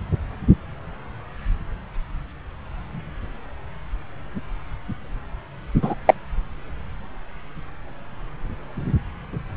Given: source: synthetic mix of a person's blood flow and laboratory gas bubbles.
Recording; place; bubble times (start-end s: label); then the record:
Doppler ultrasound of blood flow; subclavian vein
5.82-5.95 s: bubbles
6.05-6.14 s: bubbles
From the record:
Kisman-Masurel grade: 113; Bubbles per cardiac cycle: 1 to 2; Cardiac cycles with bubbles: 1 to 10%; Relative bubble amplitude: loud (0.450 to 0.775); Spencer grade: 1 (occasional bubble signal discernible with the cardiac motion signal, with majority of cardiac periods free of bubbles); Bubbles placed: anywhere in the cardiac cycle